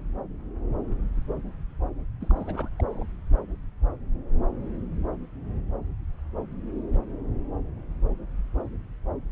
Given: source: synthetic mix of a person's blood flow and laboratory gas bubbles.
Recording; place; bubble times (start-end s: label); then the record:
Doppler ultrasound of blood flow; subclavian vein
2.20-2.69 s: bubbles
2.76-2.82 s: bubbles
2.88-3.03 s: bubbles
From the record:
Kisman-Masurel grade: 211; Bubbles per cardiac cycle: several, 3 to 8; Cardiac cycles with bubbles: 1 to 10%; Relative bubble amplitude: barely perceptible (0.100 to 0.250); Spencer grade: 1 (occasional bubble signal discernible with the cardiac motion signal, with majority of cardiac periods free of bubbles); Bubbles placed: anywhere in the cardiac cycle